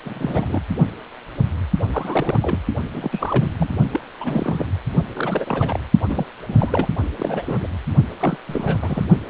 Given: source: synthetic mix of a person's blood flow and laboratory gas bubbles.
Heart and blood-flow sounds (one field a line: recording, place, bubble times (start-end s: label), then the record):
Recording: Doppler ultrasound of blood flow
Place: precordium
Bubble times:
0.05-0.62 s: bubbles
1.93-2.58 s: bubbles
2.94-3.51 s: bubbles
3.56-3.69 s: bubbles
3.91-4.00 s: bubbles
4.20-4.65 s: bubbles
5.13-5.79 s: bubbles
6.08-6.30 s: bubbles
6.46-6.88 s: bubbles
7.17-7.71 s: bubbles
8.20-8.36 s: bubbles
8.46-9.05 s: bubbles
From the record:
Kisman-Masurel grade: 332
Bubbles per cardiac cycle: rolling drumbeat, 9 or more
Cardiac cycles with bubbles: 50 to 99%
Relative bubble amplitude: moderate (0.250 to 0.450)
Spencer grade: 3 (all of the cardiac periods contain showers or single bubble signals, but not dominating or overriding the cardiac motion signals)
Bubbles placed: only in the low amplitude regions of the cardiac cycle